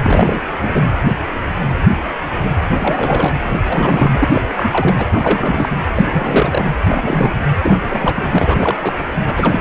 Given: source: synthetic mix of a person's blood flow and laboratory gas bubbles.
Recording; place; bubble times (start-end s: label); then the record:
Doppler ultrasound of blood flow; precordium
0.03-0.42 s: bubbles
0.61-0.84 s: bubbles
2.75-3.37 s: bubbles
3.65-4.29 s: bubbles
4.32-4.42 s: bubbles
4.56-5.06 s: bubbles
5.12-5.70 s: bubbles
5.96-6.74 s: bubbles
6.89-7.35 s: bubbles
7.62-8.29 s: bubbles
8.33-8.77 s: bubbles
8.81-9.05 s: bubbles
9.27-9.61 s: bubbles
From the record:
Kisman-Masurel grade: 332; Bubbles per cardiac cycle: rolling drumbeat, 9 or more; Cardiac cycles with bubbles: 50 to 99%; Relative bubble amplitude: moderate (0.250 to 0.450); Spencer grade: 3 (all of the cardiac periods contain showers or single bubble signals, but not dominating or overriding the cardiac motion signals); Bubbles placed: anywhere in the cardiac cycle